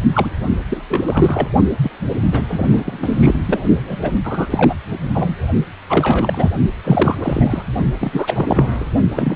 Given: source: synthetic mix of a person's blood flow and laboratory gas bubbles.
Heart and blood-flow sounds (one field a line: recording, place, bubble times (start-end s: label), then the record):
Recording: Doppler ultrasound of blood flow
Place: precordium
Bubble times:
0.13-0.31 s: bubbles
0.69-1.48 s: bubbles
1.82-1.90 s: bubbles
2.31-2.42 s: bubbles
2.48-3.40 s: bubbles
3.46-3.60 s: bubbles
3.76-3.96 s: bubbles
4.02-4.16 s: bubbles
4.24-4.75 s: bubbles
5.14-5.36 s: bubbles
5.89-6.51 s: bubbles
6.83-7.62 s: bubbles
8.01-8.87 s: bubbles
9.13-9.36 s: bubbles
From the record:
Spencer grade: 3 (all of the cardiac periods contain showers or single bubble signals, but not dominating or overriding the cardiac motion signals)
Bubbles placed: only in the low amplitude regions of the cardiac cycle